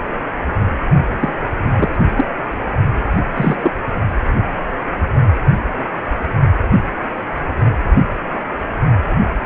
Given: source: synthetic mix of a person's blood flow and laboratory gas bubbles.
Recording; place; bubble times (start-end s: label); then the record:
Doppler ultrasound of blood flow; precordium
1.20-1.33 s: bubbles
1.76-1.96 s: bubbles
2.17-2.25 s: bubbles
3.35-3.56 s: bubbles
3.62-3.71 s: bubbles
From the record:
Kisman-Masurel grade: 223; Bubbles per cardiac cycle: several, 3 to 8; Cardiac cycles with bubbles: 10 to 50%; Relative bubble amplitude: loud (0.450 to 0.775); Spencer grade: 2 (many but less than half of the cardiac periods contain bubble signals, singularly or in groups); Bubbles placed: only in the low amplitude regions of the cardiac cycle